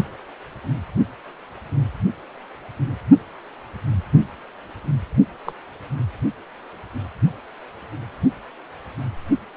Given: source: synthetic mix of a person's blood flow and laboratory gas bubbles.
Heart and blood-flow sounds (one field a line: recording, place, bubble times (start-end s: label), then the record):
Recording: Doppler ultrasound of blood flow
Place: precordium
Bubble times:
5.45-5.53 s: bubbles
From the record:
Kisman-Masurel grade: 111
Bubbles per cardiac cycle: 1 to 2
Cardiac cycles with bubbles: 1 to 10%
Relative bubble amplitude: barely perceptible (0.100 to 0.250)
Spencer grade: 1 (occasional bubble signal discernible with the cardiac motion signal, with majority of cardiac periods free of bubbles)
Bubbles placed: anywhere in the cardiac cycle